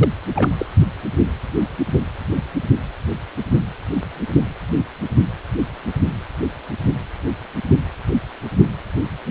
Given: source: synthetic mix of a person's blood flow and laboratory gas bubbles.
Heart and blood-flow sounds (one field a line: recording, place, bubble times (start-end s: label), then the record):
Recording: Doppler ultrasound of blood flow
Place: precordium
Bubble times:
0.00-0.09 s: bubbles
0.35-0.50 s: bubbles
0.57-0.66 s: bubbles
From the record:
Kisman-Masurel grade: 212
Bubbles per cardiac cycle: several, 3 to 8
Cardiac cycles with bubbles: 1 to 10%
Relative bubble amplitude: moderate (0.250 to 0.450)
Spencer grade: 1 (occasional bubble signal discernible with the cardiac motion signal, with majority of cardiac periods free of bubbles)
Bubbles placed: only in the low amplitude regions of the cardiac cycle